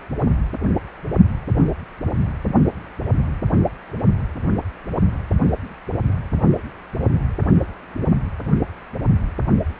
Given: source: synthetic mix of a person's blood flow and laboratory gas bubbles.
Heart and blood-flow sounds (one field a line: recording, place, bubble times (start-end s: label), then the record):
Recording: Doppler ultrasound of blood flow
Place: precordium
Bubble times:
no bubbles
From the record:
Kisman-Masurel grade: 000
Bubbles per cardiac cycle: 0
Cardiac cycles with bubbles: 0%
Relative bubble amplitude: no bubbles discernible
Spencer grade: 0 (complete lack of bubble signals)